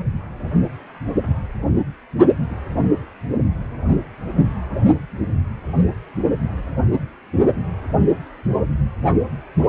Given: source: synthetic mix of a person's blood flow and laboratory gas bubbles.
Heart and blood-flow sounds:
Doppler ultrasound of blood flow; precordium
0.00-0.06 s: bubbles
From the record:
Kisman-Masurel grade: 121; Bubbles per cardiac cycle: 1 to 2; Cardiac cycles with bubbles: 10 to 50%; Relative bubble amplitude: barely perceptible (0.100 to 0.250); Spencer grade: 2 (many but less than half of the cardiac periods contain bubble signals, singularly or in groups); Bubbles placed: only in the low amplitude regions of the cardiac cycle

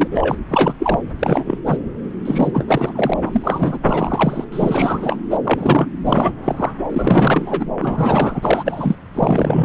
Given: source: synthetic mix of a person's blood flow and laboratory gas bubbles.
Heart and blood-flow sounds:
Doppler ultrasound of blood flow; subclavian vein
0.00-0.08 s: bubbles
0.11-0.36 s: bubbles
0.49-0.74 s: bubbles
0.79-1.00 s: bubbles
1.19-1.58 s: bubbles
1.66-1.78 s: bubbles
2.25-2.65 s: bubbles
2.67-2.92 s: bubbles
2.95-3.13 s: bubbles
3.25-3.78 s: bubbles
3.83-4.44 s: bubbles
4.52-5.21 s: bubbles
5.30-5.38 s: bubbles
5.44-5.88 s: bubbles
6.04-6.33 s: bubbles
6.44-6.71 s: bubbles
6.89-7.66 s: bubbles
7.81-8.96 s: bubbles
9.15-9.65 s: bubbles
From the record:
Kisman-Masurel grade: 343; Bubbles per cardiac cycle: rolling drumbeat, 9 or more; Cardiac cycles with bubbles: 100%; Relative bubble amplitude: loud (0.450 to 0.775); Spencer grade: 3 (all of the cardiac periods contain showers or single bubble signals, but not dominating or overriding the cardiac motion signals); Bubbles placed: anywhere in the cardiac cycle

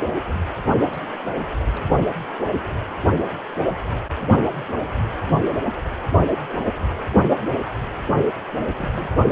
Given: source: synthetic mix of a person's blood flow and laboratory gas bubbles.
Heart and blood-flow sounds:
Doppler ultrasound of blood flow; precordium
0.91-1.09 s: bubbles
1.66-1.81 s: bubbles
8.74-9.30 s: bubbles
From the record:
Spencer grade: 2 (many but less than half of the cardiac periods contain bubble signals, singularly or in groups); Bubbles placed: only in the low amplitude regions of the cardiac cycle

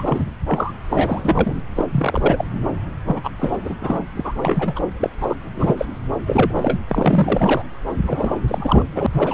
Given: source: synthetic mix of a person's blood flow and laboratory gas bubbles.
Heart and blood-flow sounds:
Doppler ultrasound of blood flow; subclavian vein
0.00-0.05 s: bubbles
0.08-0.26 s: bubbles
0.46-0.73 s: bubbles
0.90-1.56 s: bubbles
1.75-1.85 s: bubbles
1.93-2.44 s: bubbles
3.07-3.29 s: bubbles
3.40-3.57 s: bubbles
3.62-3.76 s: bubbles
3.80-4.03 s: bubbles
4.17-4.33 s: bubbles
4.42-4.79 s: bubbles
5.01-5.10 s: bubbles
5.21-5.35 s: bubbles
5.55-5.74 s: bubbles
5.77-5.85 s: bubbles
6.25-6.79 s: bubbles
6.88-7.63 s: bubbles
8.07-8.36 s: bubbles
8.47-8.85 s: bubbles
8.95-9.06 s: bubbles
9.12-9.34 s: bubbles
From the record:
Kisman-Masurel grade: 342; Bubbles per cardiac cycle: rolling drumbeat, 9 or more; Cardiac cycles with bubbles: 100%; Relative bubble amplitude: moderate (0.250 to 0.450); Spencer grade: 3 (all of the cardiac periods contain showers or single bubble signals, but not dominating or overriding the cardiac motion signals); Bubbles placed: anywhere in the cardiac cycle

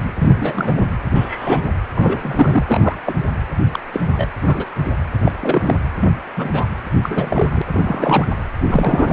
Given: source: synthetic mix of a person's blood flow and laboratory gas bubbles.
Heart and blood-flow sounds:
Doppler ultrasound of blood flow; precordium
0.19-0.85 s: bubbles
1.15-1.70 s: bubbles
1.97-3.01 s: bubbles
3.05-3.14 s: bubbles
3.73-3.79 s: bubbles
3.93-4.02 s: bubbles
4.17-4.27 s: bubbles
4.42-4.67 s: bubbles
5.25-5.32 s: bubbles
5.40-5.75 s: bubbles
6.00-6.08 s: bubbles
6.36-6.66 s: bubbles
7.02-7.62 s: bubbles
7.71-8.27 s: bubbles
8.62-9.13 s: bubbles
From the record:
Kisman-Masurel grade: 242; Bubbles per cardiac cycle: several, 3 to 8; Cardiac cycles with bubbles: 100%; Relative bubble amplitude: moderate (0.250 to 0.450); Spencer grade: 3 (all of the cardiac periods contain showers or single bubble signals, but not dominating or overriding the cardiac motion signals); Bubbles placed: anywhere in the cardiac cycle

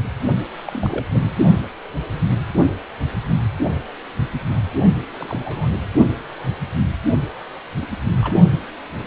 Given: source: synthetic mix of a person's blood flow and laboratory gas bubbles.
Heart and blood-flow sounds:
Doppler ultrasound of blood flow; precordium
0.68-1.05 s: bubbles
1.13-1.29 s: bubbles
5.18-5.71 s: bubbles
7.81-7.86 s: bubbles
8.22-8.35 s: bubbles
From the record:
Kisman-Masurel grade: 221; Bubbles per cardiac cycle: several, 3 to 8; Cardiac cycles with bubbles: 10 to 50%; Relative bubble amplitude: barely perceptible (0.100 to 0.250); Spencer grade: 2 (many but less than half of the cardiac periods contain bubble signals, singularly or in groups); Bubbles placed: only in the low amplitude regions of the cardiac cycle

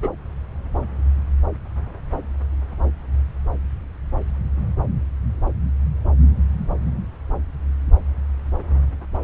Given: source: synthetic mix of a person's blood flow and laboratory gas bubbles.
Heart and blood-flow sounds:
Doppler ultrasound of blood flow; subclavian vein
0.02-0.09 s: bubbles
From the record:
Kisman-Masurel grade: 211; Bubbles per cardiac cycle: several, 3 to 8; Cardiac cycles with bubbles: 1 to 10%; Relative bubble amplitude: barely perceptible (0.100 to 0.250); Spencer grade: 1 (occasional bubble signal discernible with the cardiac motion signal, with majority of cardiac periods free of bubbles); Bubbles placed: anywhere in the cardiac cycle

